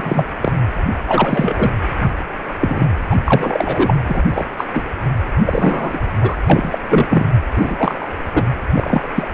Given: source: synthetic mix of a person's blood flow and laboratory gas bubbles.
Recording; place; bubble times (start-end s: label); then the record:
Doppler ultrasound of blood flow; precordium
0.00-0.24 s: bubbles
0.41-0.53 s: bubbles
1.05-1.71 s: bubbles
2.01-2.09 s: bubbles
2.59-2.88 s: bubbles
3.10-3.17 s: bubbles
3.25-3.93 s: bubbles
4.08-4.23 s: bubbles
4.35-4.44 s: bubbles
4.57-4.64 s: bubbles
4.72-4.83 s: bubbles
5.46-6.02 s: bubbles
6.21-6.37 s: bubbles
6.49-6.79 s: bubbles
6.89-7.06 s: bubbles
7.09-7.25 s: bubbles
7.56-8.08 s: bubbles
8.33-8.44 s: bubbles
8.74-9.09 s: bubbles
9.15-9.28 s: bubbles
From the record:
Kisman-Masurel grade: 243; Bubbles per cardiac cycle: several, 3 to 8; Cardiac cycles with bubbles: 100%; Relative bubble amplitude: loud (0.450 to 0.775); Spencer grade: 3 (all of the cardiac periods contain showers or single bubble signals, but not dominating or overriding the cardiac motion signals); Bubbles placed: anywhere in the cardiac cycle